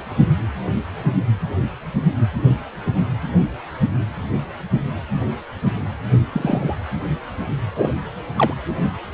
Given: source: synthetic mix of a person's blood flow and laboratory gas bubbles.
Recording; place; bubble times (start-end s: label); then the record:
Doppler ultrasound of blood flow; precordium
6.32-6.76 s: bubbles
7.75-7.93 s: bubbles
8.36-8.54 s: bubbles
From the record:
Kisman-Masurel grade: 122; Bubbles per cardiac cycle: 1 to 2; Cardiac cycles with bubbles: 10 to 50%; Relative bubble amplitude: moderate (0.250 to 0.450); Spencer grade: 2 (many but less than half of the cardiac periods contain bubble signals, singularly or in groups); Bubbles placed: anywhere in the cardiac cycle